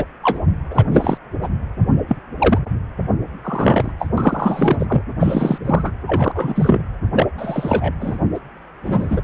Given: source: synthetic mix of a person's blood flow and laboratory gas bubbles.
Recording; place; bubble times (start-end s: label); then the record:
Doppler ultrasound of blood flow; precordium
0.00-0.04 s: bubbles
0.23-0.40 s: bubbles
0.70-0.84 s: bubbles
0.92-1.18 s: bubbles
1.42-1.48 s: bubbles
2.08-2.17 s: bubbles
2.38-2.58 s: bubbles
3.44-3.92 s: bubbles
3.99-4.08 s: bubbles
4.17-4.77 s: bubbles
4.79-4.86 s: bubbles
4.88-5.02 s: bubbles
5.19-5.58 s: bubbles
5.65-5.92 s: bubbles
6.07-6.82 s: bubbles
7.13-7.27 s: bubbles
7.38-7.94 s: bubbles
8.01-8.18 s: bubbles
8.34-8.39 s: bubbles
8.82-9.21 s: bubbles
From the record:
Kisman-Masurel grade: 243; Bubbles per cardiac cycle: several, 3 to 8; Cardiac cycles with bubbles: 100%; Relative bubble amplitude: loud (0.450 to 0.775); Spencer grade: 3 (all of the cardiac periods contain showers or single bubble signals, but not dominating or overriding the cardiac motion signals); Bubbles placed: anywhere in the cardiac cycle